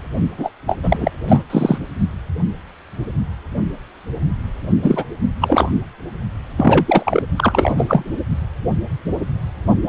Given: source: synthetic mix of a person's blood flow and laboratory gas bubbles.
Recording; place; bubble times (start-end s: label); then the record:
Doppler ultrasound of blood flow; precordium
0.37-0.50 s: bubbles
0.66-0.78 s: bubbles
0.83-1.11 s: bubbles
1.28-1.43 s: bubbles
1.49-1.78 s: bubbles
4.83-5.05 s: bubbles
5.40-5.72 s: bubbles
6.57-7.23 s: bubbles
7.36-8.04 s: bubbles
9.85-9.89 s: bubbles
From the record:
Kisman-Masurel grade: 333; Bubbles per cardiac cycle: rolling drumbeat, 9 or more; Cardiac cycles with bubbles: 50 to 99%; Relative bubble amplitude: loud (0.450 to 0.775); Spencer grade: 3 (all of the cardiac periods contain showers or single bubble signals, but not dominating or overriding the cardiac motion signals); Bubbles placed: only in the low amplitude regions of the cardiac cycle